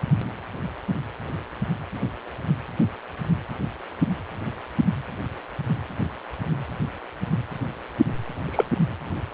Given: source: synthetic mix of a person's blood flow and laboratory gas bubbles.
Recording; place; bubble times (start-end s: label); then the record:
Doppler ultrasound of blood flow; precordium
8.45-8.70 s: bubbles
From the record:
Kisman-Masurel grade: 112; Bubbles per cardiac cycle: 1 to 2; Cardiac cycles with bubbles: 1 to 10%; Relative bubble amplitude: moderate (0.250 to 0.450); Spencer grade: 1 (occasional bubble signal discernible with the cardiac motion signal, with majority of cardiac periods free of bubbles); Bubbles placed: anywhere in the cardiac cycle